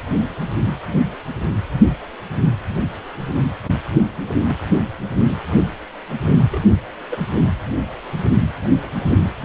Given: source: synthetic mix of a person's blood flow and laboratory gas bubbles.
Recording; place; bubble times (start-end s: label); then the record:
Doppler ultrasound of blood flow; precordium
3.62-3.71 s: bubbles
4.47-4.55 s: bubbles
6.50-6.62 s: bubbles
7.11-7.17 s: bubbles
From the record:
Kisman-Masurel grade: 121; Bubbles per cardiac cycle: 1 to 2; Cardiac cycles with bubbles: 10 to 50%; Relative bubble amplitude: barely perceptible (0.100 to 0.250); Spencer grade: 2 (many but less than half of the cardiac periods contain bubble signals, singularly or in groups); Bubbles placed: anywhere in the cardiac cycle